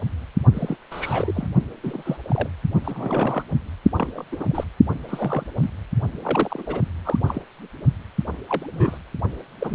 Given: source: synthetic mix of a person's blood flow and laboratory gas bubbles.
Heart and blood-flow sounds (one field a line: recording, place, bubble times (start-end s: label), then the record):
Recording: Doppler ultrasound of blood flow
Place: precordium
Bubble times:
0.53-0.76 s: bubbles
0.90-1.47 s: bubbles
1.83-2.17 s: bubbles
2.25-2.48 s: bubbles
2.75-2.81 s: bubbles
2.84-3.42 s: bubbles
3.95-4.24 s: bubbles
4.31-4.46 s: bubbles
4.50-4.64 s: bubbles
5.08-5.43 s: bubbles
5.56-5.70 s: bubbles
6.21-6.81 s: bubbles
7.04-7.17 s: bubbles
7.26-7.42 s: bubbles
8.49-8.66 s: bubbles
8.72-8.98 s: bubbles
9.60-9.75 s: bubbles
From the record:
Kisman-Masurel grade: 232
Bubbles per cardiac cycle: several, 3 to 8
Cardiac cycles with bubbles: 50 to 99%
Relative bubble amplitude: moderate (0.250 to 0.450)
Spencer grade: 3 (all of the cardiac periods contain showers or single bubble signals, but not dominating or overriding the cardiac motion signals)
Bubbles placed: only in the low amplitude regions of the cardiac cycle